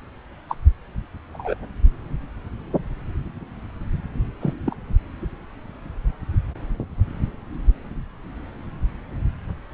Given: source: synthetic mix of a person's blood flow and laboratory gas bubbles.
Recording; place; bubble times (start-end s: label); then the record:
Doppler ultrasound of blood flow; subclavian vein
0.49-0.56 s: bubbles
1.32-1.55 s: bubbles
4.41-4.54 s: bubbles
4.66-4.77 s: bubbles
From the record:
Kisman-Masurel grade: 122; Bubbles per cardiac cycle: 1 to 2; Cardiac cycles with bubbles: 10 to 50%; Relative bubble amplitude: moderate (0.250 to 0.450); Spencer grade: 2 (many but less than half of the cardiac periods contain bubble signals, singularly or in groups); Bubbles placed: anywhere in the cardiac cycle